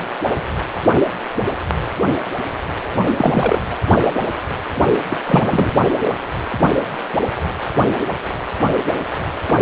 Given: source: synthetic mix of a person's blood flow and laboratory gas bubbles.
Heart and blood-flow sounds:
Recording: Doppler ultrasound of blood flow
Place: precordium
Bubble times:
3.18-3.62 s: bubbles
5.09-5.18 s: bubbles
5.26-5.73 s: bubbles
From the record:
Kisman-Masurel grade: 222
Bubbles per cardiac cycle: several, 3 to 8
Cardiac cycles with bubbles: 10 to 50%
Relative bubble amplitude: moderate (0.250 to 0.450)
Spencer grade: 2 (many but less than half of the cardiac periods contain bubble signals, singularly or in groups)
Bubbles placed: only in the low amplitude regions of the cardiac cycle

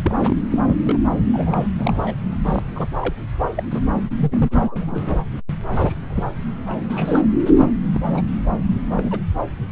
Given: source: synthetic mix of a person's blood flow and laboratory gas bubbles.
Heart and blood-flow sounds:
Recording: Doppler ultrasound of blood flow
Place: subclavian vein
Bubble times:
0.04-0.42 s: bubbles
0.52-0.97 s: bubbles
1.33-1.67 s: bubbles
1.78-2.15 s: bubbles
2.46-2.87 s: bubbles
3.01-3.15 s: bubbles
3.38-3.47 s: bubbles
3.56-3.63 s: bubbles
3.71-3.81 s: bubbles
4.20-5.15 s: bubbles
5.72-6.01 s: bubbles
6.10-6.28 s: bubbles
6.67-7.22 s: bubbles
7.50-7.69 s: bubbles
7.95-8.01 s: bubbles
8.07-8.22 s: bubbles
8.85-9.20 s: bubbles
From the record:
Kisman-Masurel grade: 232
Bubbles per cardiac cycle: several, 3 to 8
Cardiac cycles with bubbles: 50 to 99%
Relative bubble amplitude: moderate (0.250 to 0.450)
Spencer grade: 3 (all of the cardiac periods contain showers or single bubble signals, but not dominating or overriding the cardiac motion signals)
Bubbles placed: anywhere in the cardiac cycle

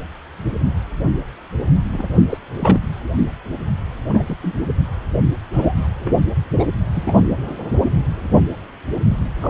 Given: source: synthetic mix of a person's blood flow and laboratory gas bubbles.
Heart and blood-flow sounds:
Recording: Doppler ultrasound of blood flow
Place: precordium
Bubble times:
1.93-2.08 s: bubbles
2.15-2.23 s: bubbles
2.29-2.38 s: bubbles
2.60-2.79 s: bubbles
4.09-4.23 s: bubbles
4.26-4.35 s: bubbles
4.42-4.59 s: bubbles
5.53-5.88 s: bubbles
5.99-6.15 s: bubbles
6.59-6.64 s: bubbles
6.93-7.15 s: bubbles
9.41-9.50 s: bubbles
From the record:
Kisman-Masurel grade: 222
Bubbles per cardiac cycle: several, 3 to 8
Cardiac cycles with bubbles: 10 to 50%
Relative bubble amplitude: moderate (0.250 to 0.450)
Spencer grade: 2 (many but less than half of the cardiac periods contain bubble signals, singularly or in groups)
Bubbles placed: anywhere in the cardiac cycle

